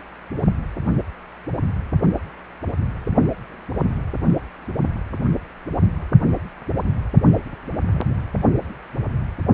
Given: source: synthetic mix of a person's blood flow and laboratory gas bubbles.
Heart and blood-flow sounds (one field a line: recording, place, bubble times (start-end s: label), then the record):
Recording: Doppler ultrasound of blood flow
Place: precordium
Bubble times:
no bubbles
From the record:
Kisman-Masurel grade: 000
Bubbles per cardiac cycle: 0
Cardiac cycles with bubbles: 0%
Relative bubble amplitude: no bubbles discernible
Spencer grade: 0 (complete lack of bubble signals)